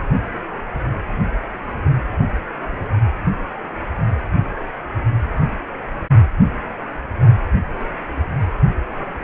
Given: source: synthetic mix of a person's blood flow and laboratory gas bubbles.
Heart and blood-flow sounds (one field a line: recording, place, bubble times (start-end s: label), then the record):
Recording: Doppler ultrasound of blood flow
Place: precordium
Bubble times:
no bubbles
From the record:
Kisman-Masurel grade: 000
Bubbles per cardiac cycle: 0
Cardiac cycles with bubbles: 0%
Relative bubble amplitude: no bubbles discernible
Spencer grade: 0 (complete lack of bubble signals)